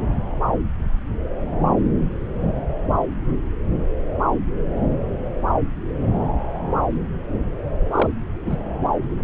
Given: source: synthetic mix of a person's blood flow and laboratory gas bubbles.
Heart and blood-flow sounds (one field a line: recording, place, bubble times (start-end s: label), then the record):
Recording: Doppler ultrasound of blood flow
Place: subclavian vein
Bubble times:
7.92-8.08 s: bubbles
8.44-8.59 s: bubbles
From the record:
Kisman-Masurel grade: 212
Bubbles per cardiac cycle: several, 3 to 8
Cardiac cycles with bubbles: 1 to 10%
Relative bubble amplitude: moderate (0.250 to 0.450)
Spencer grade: 1 (occasional bubble signal discernible with the cardiac motion signal, with majority of cardiac periods free of bubbles)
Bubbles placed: anywhere in the cardiac cycle